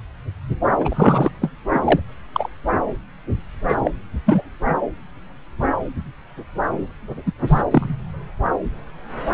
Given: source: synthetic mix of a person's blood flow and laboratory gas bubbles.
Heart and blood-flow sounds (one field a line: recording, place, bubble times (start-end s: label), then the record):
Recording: Doppler ultrasound of blood flow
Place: subclavian vein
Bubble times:
0.79-1.32 s: bubbles
1.41-1.51 s: bubbles
1.74-1.80 s: bubbles
1.84-2.00 s: bubbles
2.33-2.48 s: bubbles
3.68-3.77 s: bubbles
3.84-3.91 s: bubbles
4.25-4.42 s: bubbles
7.26-7.32 s: bubbles
7.47-7.62 s: bubbles
7.71-7.95 s: bubbles
From the record:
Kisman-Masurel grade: 223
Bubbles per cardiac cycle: several, 3 to 8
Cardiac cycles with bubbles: 10 to 50%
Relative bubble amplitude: loud (0.450 to 0.775)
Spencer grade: 2 (many but less than half of the cardiac periods contain bubble signals, singularly or in groups)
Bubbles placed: anywhere in the cardiac cycle